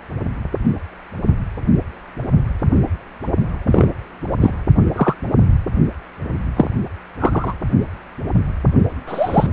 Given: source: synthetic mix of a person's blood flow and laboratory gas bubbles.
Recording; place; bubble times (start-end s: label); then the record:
Doppler ultrasound of blood flow; precordium
3.66-3.86 s: bubbles
4.40-4.51 s: bubbles
4.96-5.14 s: bubbles
6.56-6.69 s: bubbles
7.19-7.55 s: bubbles
9.07-9.46 s: bubbles
From the record:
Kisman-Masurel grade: 123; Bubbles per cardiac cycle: 1 to 2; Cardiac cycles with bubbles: 10 to 50%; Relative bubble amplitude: loud (0.450 to 0.775); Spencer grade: 2 (many but less than half of the cardiac periods contain bubble signals, singularly or in groups); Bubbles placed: only in the low amplitude regions of the cardiac cycle